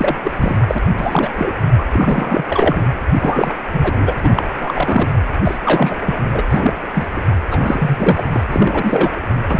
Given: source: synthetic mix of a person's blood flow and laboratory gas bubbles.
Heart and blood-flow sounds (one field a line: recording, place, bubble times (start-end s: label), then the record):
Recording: Doppler ultrasound of blood flow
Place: precordium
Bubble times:
0.00-0.16 s: bubbles
0.24-0.31 s: bubbles
0.36-0.60 s: bubbles
0.67-0.78 s: bubbles
0.97-1.30 s: bubbles
1.33-1.52 s: bubbles
1.78-1.86 s: bubbles
1.93-2.44 s: bubbles
2.47-2.91 s: bubbles
3.20-3.55 s: bubbles
3.73-4.14 s: bubbles
4.23-4.44 s: bubbles
4.60-5.09 s: bubbles
5.44-5.59 s: bubbles
5.64-5.98 s: bubbles
6.06-6.21 s: bubbles
6.33-6.43 s: bubbles
6.50-6.74 s: bubbles
6.95-7.09 s: bubbles
7.16-7.21 s: bubbles
7.50-8.22 s: bubbles
8.33-8.44 s: bubbles
8.50-9.20 s: bubbles
9.47-9.60 s: bubbles
From the record:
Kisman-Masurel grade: 343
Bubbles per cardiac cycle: rolling drumbeat, 9 or more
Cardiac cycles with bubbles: 100%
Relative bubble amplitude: loud (0.450 to 0.775)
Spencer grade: 3 (all of the cardiac periods contain showers or single bubble signals, but not dominating or overriding the cardiac motion signals)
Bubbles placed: anywhere in the cardiac cycle